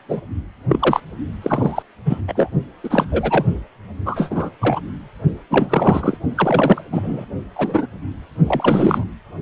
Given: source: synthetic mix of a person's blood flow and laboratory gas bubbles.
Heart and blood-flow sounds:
Doppler ultrasound of blood flow; precordium
0.08-0.20 s: bubbles
0.68-1.00 s: bubbles
1.41-1.83 s: bubbles
2.05-2.22 s: bubbles
2.27-2.50 s: bubbles
2.83-3.06 s: bubbles
3.12-3.46 s: bubbles
4.05-4.50 s: bubbles
4.59-4.80 s: bubbles
5.50-6.17 s: bubbles
6.35-6.82 s: bubbles
6.92-7.25 s: bubbles
7.55-7.88 s: bubbles
8.46-9.04 s: bubbles
From the record:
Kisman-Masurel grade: 243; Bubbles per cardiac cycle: several, 3 to 8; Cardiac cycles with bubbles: 100%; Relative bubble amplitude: loud (0.450 to 0.775); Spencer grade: 3 (all of the cardiac periods contain showers or single bubble signals, but not dominating or overriding the cardiac motion signals); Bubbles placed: only in the low amplitude regions of the cardiac cycle

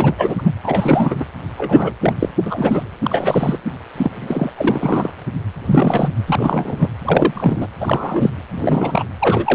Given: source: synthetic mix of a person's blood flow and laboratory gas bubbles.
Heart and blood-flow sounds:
Doppler ultrasound of blood flow; precordium
0.00-0.14 s: bubbles
0.18-0.50 s: bubbles
0.64-1.16 s: bubbles
1.20-1.25 s: bubbles
1.57-1.94 s: bubbles
2.00-2.29 s: bubbles
2.46-2.83 s: bubbles
3.02-3.58 s: bubbles
3.97-4.50 s: bubbles
4.54-5.10 s: bubbles
5.65-6.09 s: bubbles
6.27-6.88 s: bubbles
7.04-7.68 s: bubbles
7.80-8.33 s: bubbles
8.51-9.04 s: bubbles
9.21-9.55 s: bubbles
From the record:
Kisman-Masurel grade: 332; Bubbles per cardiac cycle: rolling drumbeat, 9 or more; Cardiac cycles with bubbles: 50 to 99%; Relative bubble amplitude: moderate (0.250 to 0.450); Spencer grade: 3 (all of the cardiac periods contain showers or single bubble signals, but not dominating or overriding the cardiac motion signals); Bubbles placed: anywhere in the cardiac cycle

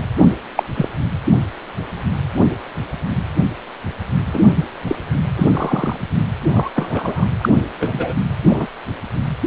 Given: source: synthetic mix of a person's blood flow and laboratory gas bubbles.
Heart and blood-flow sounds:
Doppler ultrasound of blood flow; precordium
0.56-0.63 s: bubbles
0.74-0.89 s: bubbles
4.33-4.42 s: bubbles
4.87-4.96 s: bubbles
5.36-5.97 s: bubbles
6.51-6.70 s: bubbles
6.75-7.25 s: bubbles
7.41-7.49 s: bubbles
7.80-8.13 s: bubbles
8.49-8.67 s: bubbles
From the record:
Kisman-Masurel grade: 123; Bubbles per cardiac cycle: 1 to 2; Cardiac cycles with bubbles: 10 to 50%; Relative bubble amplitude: loud (0.450 to 0.775); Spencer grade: 2 (many but less than half of the cardiac periods contain bubble signals, singularly or in groups); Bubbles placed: anywhere in the cardiac cycle

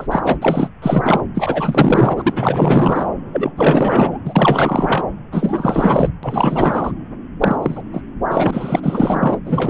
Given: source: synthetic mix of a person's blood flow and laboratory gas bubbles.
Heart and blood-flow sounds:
Doppler ultrasound of blood flow; subclavian vein
0.00-0.07 s: bubbles
0.11-0.37 s: bubbles
0.41-0.68 s: bubbles
0.82-1.21 s: bubbles
1.34-3.09 s: bubbles
3.32-3.52 s: bubbles
3.57-4.18 s: bubbles
4.25-5.04 s: bubbles
5.31-6.09 s: bubbles
6.23-6.92 s: bubbles
7.40-7.56 s: bubbles
7.62-7.82 s: bubbles
7.92-8.02 s: bubbles
8.31-9.39 s: bubbles
9.45-9.70 s: bubbles
From the record:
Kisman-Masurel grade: 444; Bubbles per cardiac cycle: continuous sound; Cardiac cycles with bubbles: 100%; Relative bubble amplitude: maximal (0.775 to 0.999); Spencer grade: 4 (maximum detectable bubble signal sounding continuously throughout systole and diastole of every cardiac period, and overriding the amplitude of the normal cardiac signals); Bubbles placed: anywhere in the cardiac cycle

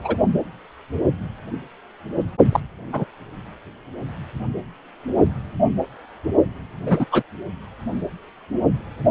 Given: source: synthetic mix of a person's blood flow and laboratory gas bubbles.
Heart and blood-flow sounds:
Doppler ultrasound of blood flow; precordium
0.04-0.17 s: bubbles
2.52-2.60 s: bubbles
2.93-3.04 s: bubbles
6.86-7.05 s: bubbles
7.12-7.22 s: bubbles
From the record:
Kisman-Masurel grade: 123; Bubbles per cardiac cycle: 1 to 2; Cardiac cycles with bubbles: 10 to 50%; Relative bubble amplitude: loud (0.450 to 0.775); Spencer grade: 2 (many but less than half of the cardiac periods contain bubble signals, singularly or in groups); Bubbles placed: only in the low amplitude regions of the cardiac cycle

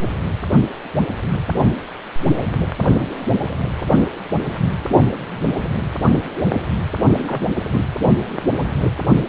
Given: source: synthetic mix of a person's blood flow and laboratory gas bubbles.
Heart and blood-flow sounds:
Doppler ultrasound of blood flow; precordium
7.18-7.45 s: bubbles
7.71-7.84 s: bubbles
8.00-8.06 s: bubbles
From the record:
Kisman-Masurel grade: 212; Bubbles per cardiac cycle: several, 3 to 8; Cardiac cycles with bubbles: 1 to 10%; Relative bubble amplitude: moderate (0.250 to 0.450); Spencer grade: 1 (occasional bubble signal discernible with the cardiac motion signal, with majority of cardiac periods free of bubbles); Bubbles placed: only in the low amplitude regions of the cardiac cycle

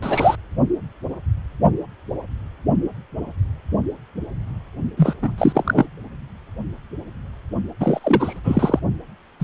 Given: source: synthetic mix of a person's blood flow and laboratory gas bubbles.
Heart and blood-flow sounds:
Doppler ultrasound of blood flow; precordium
0.02-0.35 s: bubbles
4.96-5.14 s: bubbles
5.22-5.36 s: bubbles
5.38-5.86 s: bubbles
7.80-8.39 s: bubbles
8.44-8.79 s: bubbles
9.40-9.44 s: bubbles
From the record:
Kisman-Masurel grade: 223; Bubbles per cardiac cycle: several, 3 to 8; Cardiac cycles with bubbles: 10 to 50%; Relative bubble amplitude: loud (0.450 to 0.775); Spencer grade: 2 (many but less than half of the cardiac periods contain bubble signals, singularly or in groups); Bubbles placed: only in the low amplitude regions of the cardiac cycle

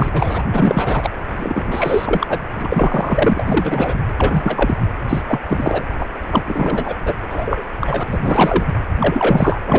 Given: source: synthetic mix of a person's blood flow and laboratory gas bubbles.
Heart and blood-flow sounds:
Doppler ultrasound of blood flow; precordium
0.00-0.09 s: bubbles
0.12-0.43 s: bubbles
0.52-1.10 s: bubbles
1.31-2.39 s: bubbles
2.55-4.00 s: bubbles
4.18-4.77 s: bubbles
5.08-5.21 s: bubbles
5.27-5.39 s: bubbles
5.48-5.83 s: bubbles
5.99-6.06 s: bubbles
6.30-6.43 s: bubbles
6.46-6.96 s: bubbles
7.05-7.14 s: bubbles
7.18-7.63 s: bubbles
7.80-8.04 s: bubbles
8.07-8.18 s: bubbles
8.21-8.65 s: bubbles
9.00-9.79 s: bubbles
From the record:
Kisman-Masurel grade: 343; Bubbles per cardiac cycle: rolling drumbeat, 9 or more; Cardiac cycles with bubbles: 100%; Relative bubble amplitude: loud (0.450 to 0.775); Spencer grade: 3 (all of the cardiac periods contain showers or single bubble signals, but not dominating or overriding the cardiac motion signals); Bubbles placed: anywhere in the cardiac cycle

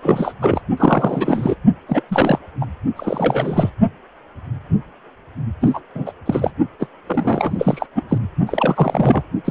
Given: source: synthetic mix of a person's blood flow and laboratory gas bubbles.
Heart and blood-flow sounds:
Doppler ultrasound of blood flow; precordium
0.02-0.33 s: bubbles
0.41-0.61 s: bubbles
0.77-1.55 s: bubbles
1.87-2.04 s: bubbles
2.08-2.39 s: bubbles
2.60-2.66 s: bubbles
2.96-3.70 s: bubbles
5.60-5.80 s: bubbles
5.94-6.12 s: bubbles
6.25-6.51 s: bubbles
6.79-6.86 s: bubbles
7.07-7.86 s: bubbles
7.96-8.04 s: bubbles
8.08-8.18 s: bubbles
8.46-9.22 s: bubbles
9.45-9.50 s: bubbles
From the record:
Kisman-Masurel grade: 333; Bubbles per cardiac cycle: rolling drumbeat, 9 or more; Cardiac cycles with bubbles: 50 to 99%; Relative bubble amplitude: loud (0.450 to 0.775); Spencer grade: 3 (all of the cardiac periods contain showers or single bubble signals, but not dominating or overriding the cardiac motion signals); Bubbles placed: only in the low amplitude regions of the cardiac cycle

